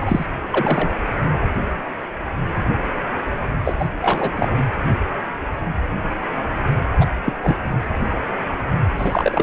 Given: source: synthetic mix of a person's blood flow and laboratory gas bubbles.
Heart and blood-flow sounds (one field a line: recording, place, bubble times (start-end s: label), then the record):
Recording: Doppler ultrasound of blood flow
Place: precordium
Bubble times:
0.00-0.26 s: bubbles
0.51-0.90 s: bubbles
3.64-3.75 s: bubbles
3.79-3.88 s: bubbles
4.01-4.54 s: bubbles
7.00-7.06 s: bubbles
7.25-7.33 s: bubbles
7.42-7.56 s: bubbles
8.97-9.42 s: bubbles
From the record:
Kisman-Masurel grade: 232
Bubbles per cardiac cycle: several, 3 to 8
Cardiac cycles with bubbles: 50 to 99%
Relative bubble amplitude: moderate (0.250 to 0.450)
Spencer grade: 3 (all of the cardiac periods contain showers or single bubble signals, but not dominating or overriding the cardiac motion signals)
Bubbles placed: anywhere in the cardiac cycle